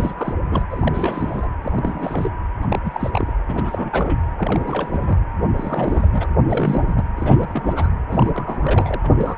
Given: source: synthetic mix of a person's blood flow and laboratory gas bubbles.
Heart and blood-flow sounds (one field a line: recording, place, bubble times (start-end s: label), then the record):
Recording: Doppler ultrasound of blood flow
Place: precordium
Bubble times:
0.00-0.33 s: bubbles
0.40-0.66 s: bubbles
0.70-1.49 s: bubbles
1.63-2.30 s: bubbles
2.62-2.79 s: bubbles
2.83-3.32 s: bubbles
3.47-4.19 s: bubbles
4.39-5.18 s: bubbles
5.55-6.27 s: bubbles
6.46-7.04 s: bubbles
7.16-7.92 s: bubbles
8.07-9.01 s: bubbles
9.03-9.12 s: bubbles
9.17-9.37 s: bubbles
From the record:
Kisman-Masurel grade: 342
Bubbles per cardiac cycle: rolling drumbeat, 9 or more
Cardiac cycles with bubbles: 100%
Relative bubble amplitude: moderate (0.250 to 0.450)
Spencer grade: 3 (all of the cardiac periods contain showers or single bubble signals, but not dominating or overriding the cardiac motion signals)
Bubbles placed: anywhere in the cardiac cycle